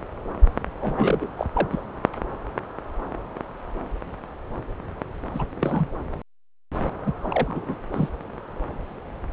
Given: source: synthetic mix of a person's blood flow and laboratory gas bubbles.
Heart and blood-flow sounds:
Doppler ultrasound of blood flow; subclavian vein
0.80-1.29 s: bubbles
1.36-1.47 s: bubbles
1.54-1.68 s: bubbles
1.72-1.82 s: bubbles
5.34-5.46 s: bubbles
5.60-5.88 s: bubbles
7.06-7.13 s: bubbles
7.22-7.75 s: bubbles
7.93-8.09 s: bubbles
From the record:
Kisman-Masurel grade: 222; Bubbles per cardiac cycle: several, 3 to 8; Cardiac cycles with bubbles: 10 to 50%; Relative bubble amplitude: moderate (0.250 to 0.450); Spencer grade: 2 (many but less than half of the cardiac periods contain bubble signals, singularly or in groups); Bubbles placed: anywhere in the cardiac cycle

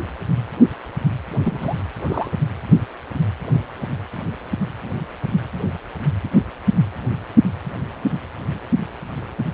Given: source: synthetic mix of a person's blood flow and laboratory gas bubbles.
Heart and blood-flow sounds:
Doppler ultrasound of blood flow; precordium
1.44-1.83 s: bubbles
2.09-2.31 s: bubbles
From the record:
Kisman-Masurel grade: 212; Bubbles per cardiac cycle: several, 3 to 8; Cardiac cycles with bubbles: 1 to 10%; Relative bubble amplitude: moderate (0.250 to 0.450); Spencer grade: 1 (occasional bubble signal discernible with the cardiac motion signal, with majority of cardiac periods free of bubbles); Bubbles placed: anywhere in the cardiac cycle

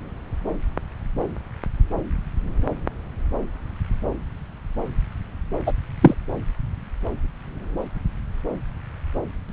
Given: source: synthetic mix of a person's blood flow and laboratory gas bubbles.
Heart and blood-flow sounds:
Doppler ultrasound of blood flow; subclavian vein
5.66-5.72 s: bubbles
6.01-6.15 s: bubbles
From the record:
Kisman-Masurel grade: 113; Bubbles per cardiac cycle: 1 to 2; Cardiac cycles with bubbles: 1 to 10%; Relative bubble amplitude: loud (0.450 to 0.775); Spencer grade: 1 (occasional bubble signal discernible with the cardiac motion signal, with majority of cardiac periods free of bubbles); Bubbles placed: anywhere in the cardiac cycle

